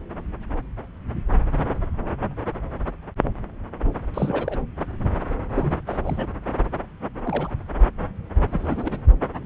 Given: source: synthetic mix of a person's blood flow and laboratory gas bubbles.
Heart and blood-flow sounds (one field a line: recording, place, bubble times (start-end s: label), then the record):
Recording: Doppler ultrasound of blood flow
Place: subclavian vein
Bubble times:
4.13-4.57 s: bubbles
5.56-5.75 s: bubbles
5.87-5.97 s: bubbles
6.04-6.27 s: bubbles
7.25-7.51 s: bubbles
8.48-9.02 s: bubbles
From the record:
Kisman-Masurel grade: 221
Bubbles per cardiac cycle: several, 3 to 8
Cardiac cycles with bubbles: 10 to 50%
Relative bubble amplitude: barely perceptible (0.100 to 0.250)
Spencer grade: 2 (many but less than half of the cardiac periods contain bubble signals, singularly or in groups)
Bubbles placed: anywhere in the cardiac cycle